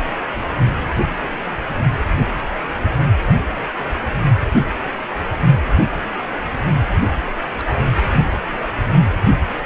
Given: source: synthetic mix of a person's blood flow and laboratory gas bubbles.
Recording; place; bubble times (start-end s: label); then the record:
Doppler ultrasound of blood flow; precordium
7.57-7.76 s: bubbles
From the record:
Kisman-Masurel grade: 111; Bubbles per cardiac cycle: 1 to 2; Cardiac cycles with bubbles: 1 to 10%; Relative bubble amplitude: barely perceptible (0.100 to 0.250); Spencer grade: 1 (occasional bubble signal discernible with the cardiac motion signal, with majority of cardiac periods free of bubbles); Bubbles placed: only in the low amplitude regions of the cardiac cycle